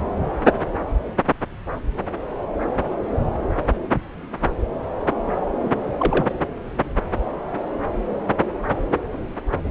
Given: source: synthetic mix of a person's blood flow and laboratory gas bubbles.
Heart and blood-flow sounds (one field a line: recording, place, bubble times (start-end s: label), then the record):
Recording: Doppler ultrasound of blood flow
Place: subclavian vein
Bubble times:
5.63-5.71 s: bubbles
5.99-6.25 s: bubbles
From the record:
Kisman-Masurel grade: 112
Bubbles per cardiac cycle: 1 to 2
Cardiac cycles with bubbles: 1 to 10%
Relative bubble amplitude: moderate (0.250 to 0.450)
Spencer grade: 1 (occasional bubble signal discernible with the cardiac motion signal, with majority of cardiac periods free of bubbles)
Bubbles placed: anywhere in the cardiac cycle